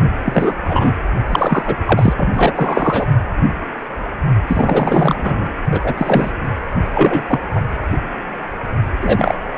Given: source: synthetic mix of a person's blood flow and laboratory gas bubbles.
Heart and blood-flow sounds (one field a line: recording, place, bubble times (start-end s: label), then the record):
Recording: Doppler ultrasound of blood flow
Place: precordium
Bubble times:
0.24-0.56 s: bubbles
0.68-0.92 s: bubbles
1.26-1.77 s: bubbles
1.85-2.13 s: bubbles
2.17-3.06 s: bubbles
4.47-5.47 s: bubbles
5.71-5.93 s: bubbles
5.97-6.31 s: bubbles
6.94-7.24 s: bubbles
7.28-7.39 s: bubbles
7.53-7.61 s: bubbles
9.00-9.37 s: bubbles
From the record:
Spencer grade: 3 (all of the cardiac periods contain showers or single bubble signals, but not dominating or overriding the cardiac motion signals)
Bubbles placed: anywhere in the cardiac cycle